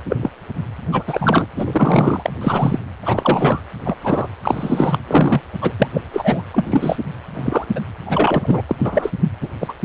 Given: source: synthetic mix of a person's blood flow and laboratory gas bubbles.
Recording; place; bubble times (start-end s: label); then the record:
Doppler ultrasound of blood flow; precordium
0.05-0.16 s: bubbles
0.21-0.31 s: bubbles
0.91-1.03 s: bubbles
1.07-1.46 s: bubbles
1.54-2.23 s: bubbles
2.25-2.32 s: bubbles
2.41-2.80 s: bubbles
3.03-3.62 s: bubbles
3.85-3.96 s: bubbles
4.01-4.29 s: bubbles
4.43-4.99 s: bubbles
5.07-5.42 s: bubbles
5.61-5.73 s: bubbles
5.79-5.89 s: bubbles
5.94-6.02 s: bubbles
6.12-6.42 s: bubbles
6.54-6.96 s: bubbles
7.34-7.65 s: bubbles
7.75-7.80 s: bubbles
8.06-8.61 s: bubbles
8.68-8.76 s: bubbles
8.79-9.10 s: bubbles
9.41-9.49 s: bubbles
9.60-9.73 s: bubbles
From the record:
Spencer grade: 3 (all of the cardiac periods contain showers or single bubble signals, but not dominating or overriding the cardiac motion signals); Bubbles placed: anywhere in the cardiac cycle